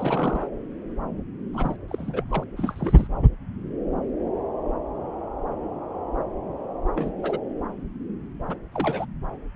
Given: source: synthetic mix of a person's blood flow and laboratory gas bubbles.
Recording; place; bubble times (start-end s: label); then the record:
Doppler ultrasound of blood flow; subclavian vein
0.00-0.48 s: bubbles
1.52-1.76 s: bubbles
1.89-2.24 s: bubbles
2.30-2.44 s: bubbles
2.56-3.07 s: bubbles
6.95-7.11 s: bubbles
7.17-7.39 s: bubbles
8.47-8.57 s: bubbles
8.72-9.05 s: bubbles
From the record:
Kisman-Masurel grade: 221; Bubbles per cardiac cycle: several, 3 to 8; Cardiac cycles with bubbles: 10 to 50%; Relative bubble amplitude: barely perceptible (0.100 to 0.250); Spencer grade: 2 (many but less than half of the cardiac periods contain bubble signals, singularly or in groups); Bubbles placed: anywhere in the cardiac cycle